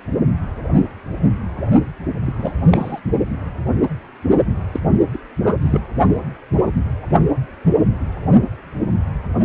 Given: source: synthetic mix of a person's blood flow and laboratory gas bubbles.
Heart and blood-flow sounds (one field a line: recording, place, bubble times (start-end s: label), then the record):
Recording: Doppler ultrasound of blood flow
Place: precordium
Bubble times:
2.26-2.33 s: bubbles
2.38-2.54 s: bubbles
2.71-3.00 s: bubbles
4.72-4.80 s: bubbles
5.13-5.18 s: bubbles
5.44-5.56 s: bubbles
5.62-5.84 s: bubbles
From the record:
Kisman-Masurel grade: 222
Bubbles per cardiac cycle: several, 3 to 8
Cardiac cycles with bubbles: 10 to 50%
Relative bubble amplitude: moderate (0.250 to 0.450)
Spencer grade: 2 (many but less than half of the cardiac periods contain bubble signals, singularly or in groups)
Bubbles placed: only in the low amplitude regions of the cardiac cycle